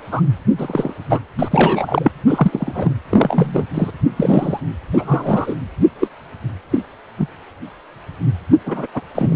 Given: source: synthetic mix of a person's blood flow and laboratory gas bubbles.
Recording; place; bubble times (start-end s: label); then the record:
Doppler ultrasound of blood flow; precordium
0.11-0.22 s: bubbles
0.57-0.94 s: bubbles
1.09-1.20 s: bubbles
1.39-2.11 s: bubbles
2.27-2.94 s: bubbles
3.10-3.65 s: bubbles
3.74-3.91 s: bubbles
4.16-4.60 s: bubbles
4.93-5.55 s: bubbles
5.99-6.08 s: bubbles
6.71-6.79 s: bubbles
7.17-7.28 s: bubbles
8.65-8.86 s: bubbles
8.94-9.01 s: bubbles
9.14-9.36 s: bubbles
From the record:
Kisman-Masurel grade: 233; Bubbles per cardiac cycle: several, 3 to 8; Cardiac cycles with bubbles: 50 to 99%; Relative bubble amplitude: loud (0.450 to 0.775); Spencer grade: 3 (all of the cardiac periods contain showers or single bubble signals, but not dominating or overriding the cardiac motion signals); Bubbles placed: anywhere in the cardiac cycle